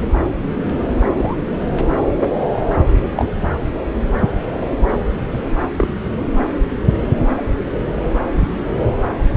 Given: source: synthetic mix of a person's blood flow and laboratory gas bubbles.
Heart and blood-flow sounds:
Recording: Doppler ultrasound of blood flow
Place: subclavian vein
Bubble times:
1.15-1.36 s: bubbles
3.16-3.31 s: bubbles
5.77-5.88 s: bubbles
From the record:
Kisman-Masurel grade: 122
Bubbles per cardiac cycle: 1 to 2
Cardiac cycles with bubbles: 10 to 50%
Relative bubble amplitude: moderate (0.250 to 0.450)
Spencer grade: 2 (many but less than half of the cardiac periods contain bubble signals, singularly or in groups)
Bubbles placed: anywhere in the cardiac cycle

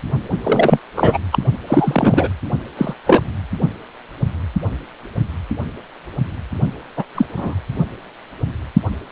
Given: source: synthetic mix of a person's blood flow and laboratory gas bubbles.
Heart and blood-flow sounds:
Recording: Doppler ultrasound of blood flow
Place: precordium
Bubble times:
0.43-0.80 s: bubbles
0.96-1.18 s: bubbles
1.32-1.39 s: bubbles
1.67-2.28 s: bubbles
2.77-2.94 s: bubbles
3.06-3.24 s: bubbles
6.96-7.04 s: bubbles
7.14-7.25 s: bubbles
7.37-7.55 s: bubbles
From the record:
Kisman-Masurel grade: 223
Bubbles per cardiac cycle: several, 3 to 8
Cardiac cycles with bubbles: 10 to 50%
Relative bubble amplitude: loud (0.450 to 0.775)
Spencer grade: 2 (many but less than half of the cardiac periods contain bubble signals, singularly or in groups)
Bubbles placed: only in the low amplitude regions of the cardiac cycle

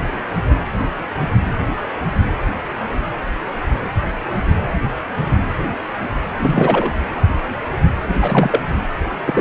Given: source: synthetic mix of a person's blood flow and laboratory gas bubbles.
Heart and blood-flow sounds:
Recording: Doppler ultrasound of blood flow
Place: precordium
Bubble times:
6.37-6.93 s: bubbles
8.21-8.63 s: bubbles
9.27-9.41 s: bubbles
From the record:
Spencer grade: 2 (many but less than half of the cardiac periods contain bubble signals, singularly or in groups)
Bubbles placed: anywhere in the cardiac cycle

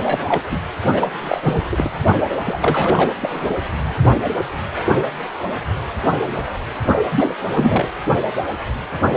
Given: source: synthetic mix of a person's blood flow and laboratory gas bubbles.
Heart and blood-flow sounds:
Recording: Doppler ultrasound of blood flow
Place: precordium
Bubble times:
0.00-0.41 s: bubbles
0.51-0.57 s: bubbles
0.90-1.08 s: bubbles
1.22-1.41 s: bubbles
1.44-1.61 s: bubbles
1.72-1.92 s: bubbles
2.44-3.13 s: bubbles
3.21-3.54 s: bubbles
7.04-7.33 s: bubbles
7.54-7.88 s: bubbles
From the record:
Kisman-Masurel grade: 232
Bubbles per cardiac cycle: several, 3 to 8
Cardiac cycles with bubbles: 50 to 99%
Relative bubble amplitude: moderate (0.250 to 0.450)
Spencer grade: 3 (all of the cardiac periods contain showers or single bubble signals, but not dominating or overriding the cardiac motion signals)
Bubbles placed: anywhere in the cardiac cycle

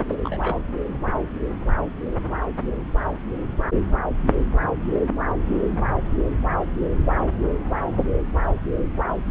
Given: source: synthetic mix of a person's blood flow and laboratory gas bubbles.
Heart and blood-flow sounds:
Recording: Doppler ultrasound of blood flow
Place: subclavian vein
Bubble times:
0.09-0.15 s: bubbles
0.24-0.62 s: bubbles
From the record:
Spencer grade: 1 (occasional bubble signal discernible with the cardiac motion signal, with majority of cardiac periods free of bubbles)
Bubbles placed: anywhere in the cardiac cycle

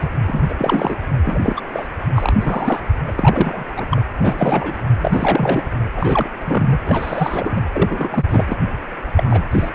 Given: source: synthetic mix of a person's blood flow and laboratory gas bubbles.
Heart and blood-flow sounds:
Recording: Doppler ultrasound of blood flow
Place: precordium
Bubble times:
0.00-0.08 s: bubbles
0.27-0.46 s: bubbles
0.49-0.55 s: bubbles
0.57-0.98 s: bubbles
1.25-1.61 s: bubbles
1.72-1.88 s: bubbles
2.15-2.37 s: bubbles
2.40-2.80 s: bubbles
3.07-3.13 s: bubbles
3.17-3.65 s: bubbles
3.76-3.88 s: bubbles
3.90-4.02 s: bubbles
4.21-4.75 s: bubbles
5.00-5.82 s: bubbles
5.96-6.29 s: bubbles
6.38-6.79 s: bubbles
6.87-7.63 s: bubbles
7.72-8.25 s: bubbles
8.29-8.57 s: bubbles
9.16-9.45 s: bubbles
9.51-9.70 s: bubbles
From the record:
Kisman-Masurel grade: 342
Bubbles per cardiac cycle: rolling drumbeat, 9 or more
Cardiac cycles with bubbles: 100%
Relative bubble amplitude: moderate (0.250 to 0.450)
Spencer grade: 3 (all of the cardiac periods contain showers or single bubble signals, but not dominating or overriding the cardiac motion signals)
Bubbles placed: anywhere in the cardiac cycle

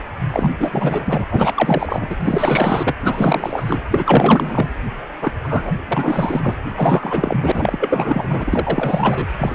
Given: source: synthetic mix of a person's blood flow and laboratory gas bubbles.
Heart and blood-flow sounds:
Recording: Doppler ultrasound of blood flow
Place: precordium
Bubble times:
0.30-0.52 s: bubbles
0.59-1.26 s: bubbles
1.29-2.17 s: bubbles
2.21-2.94 s: bubbles
3.00-3.84 s: bubbles
3.90-4.75 s: bubbles
5.21-5.32 s: bubbles
5.43-5.73 s: bubbles
5.88-6.57 s: bubbles
6.69-6.71 s: bubbles
6.75-9.27 s: bubbles
9.38-9.55 s: bubbles
From the record:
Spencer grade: 4 (maximum detectable bubble signal sounding continuously throughout systole and diastole of every cardiac period, and overriding the amplitude of the normal cardiac signals)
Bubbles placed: anywhere in the cardiac cycle

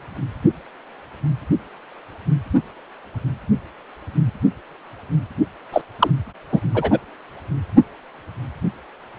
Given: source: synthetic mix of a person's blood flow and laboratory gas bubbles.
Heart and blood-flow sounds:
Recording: Doppler ultrasound of blood flow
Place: precordium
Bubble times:
5.72-5.81 s: bubbles
5.99-6.10 s: bubbles
6.52-6.60 s: bubbles
6.74-6.99 s: bubbles
From the record:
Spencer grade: 1 (occasional bubble signal discernible with the cardiac motion signal, with majority of cardiac periods free of bubbles)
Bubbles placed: anywhere in the cardiac cycle

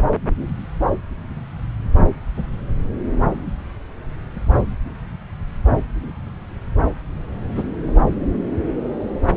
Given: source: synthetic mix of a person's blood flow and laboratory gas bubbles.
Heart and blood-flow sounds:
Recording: Doppler ultrasound of blood flow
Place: subclavian vein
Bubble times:
7.55-7.64 s: bubbles
From the record:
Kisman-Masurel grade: 123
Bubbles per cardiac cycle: 1 to 2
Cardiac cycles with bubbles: 10 to 50%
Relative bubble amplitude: loud (0.450 to 0.775)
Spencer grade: 2 (many but less than half of the cardiac periods contain bubble signals, singularly or in groups)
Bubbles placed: anywhere in the cardiac cycle

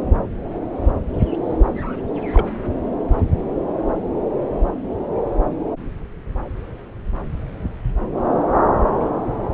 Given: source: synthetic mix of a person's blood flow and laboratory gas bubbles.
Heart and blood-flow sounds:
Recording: Doppler ultrasound of blood flow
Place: subclavian vein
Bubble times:
2.33-2.52 s: bubbles
From the record:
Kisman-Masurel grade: 112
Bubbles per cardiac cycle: 1 to 2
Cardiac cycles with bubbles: 1 to 10%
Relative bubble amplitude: moderate (0.250 to 0.450)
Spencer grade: 1 (occasional bubble signal discernible with the cardiac motion signal, with majority of cardiac periods free of bubbles)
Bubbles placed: anywhere in the cardiac cycle

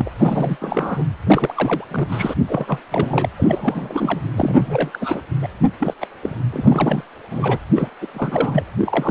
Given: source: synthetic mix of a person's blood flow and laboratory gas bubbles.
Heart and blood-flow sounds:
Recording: Doppler ultrasound of blood flow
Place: precordium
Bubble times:
0.00-0.11 s: bubbles
0.18-0.57 s: bubbles
0.60-1.05 s: bubbles
1.27-1.85 s: bubbles
1.90-2.33 s: bubbles
2.45-2.81 s: bubbles
2.90-3.29 s: bubbles
3.38-4.21 s: bubbles
4.35-4.90 s: bubbles
4.93-5.27 s: bubbles
5.41-5.47 s: bubbles
5.62-5.69 s: bubbles
5.79-5.94 s: bubbles
6.00-6.07 s: bubbles
6.22-6.36 s: bubbles
6.52-7.04 s: bubbles
7.30-7.58 s: bubbles
7.75-7.89 s: bubbles
8.01-8.07 s: bubbles
8.13-8.63 s: bubbles
8.78-9.11 s: bubbles
From the record:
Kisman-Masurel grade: 342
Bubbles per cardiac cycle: rolling drumbeat, 9 or more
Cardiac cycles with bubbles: 100%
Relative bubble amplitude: moderate (0.250 to 0.450)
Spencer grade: 3 (all of the cardiac periods contain showers or single bubble signals, but not dominating or overriding the cardiac motion signals)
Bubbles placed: anywhere in the cardiac cycle

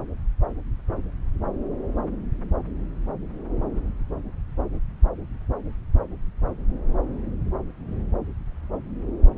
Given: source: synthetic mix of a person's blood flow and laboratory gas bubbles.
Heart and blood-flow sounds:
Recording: Doppler ultrasound of blood flow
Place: subclavian vein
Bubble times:
no bubbles
From the record:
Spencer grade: 0 (complete lack of bubble signals)

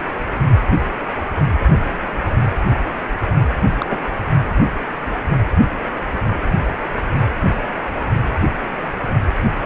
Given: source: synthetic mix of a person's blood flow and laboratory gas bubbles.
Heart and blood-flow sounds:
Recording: Doppler ultrasound of blood flow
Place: precordium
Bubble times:
3.78-3.86 s: bubbles
3.90-3.98 s: bubbles
From the record:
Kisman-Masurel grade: 112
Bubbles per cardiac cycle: 1 to 2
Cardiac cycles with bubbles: 1 to 10%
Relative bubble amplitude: moderate (0.250 to 0.450)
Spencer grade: 1 (occasional bubble signal discernible with the cardiac motion signal, with majority of cardiac periods free of bubbles)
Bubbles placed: anywhere in the cardiac cycle

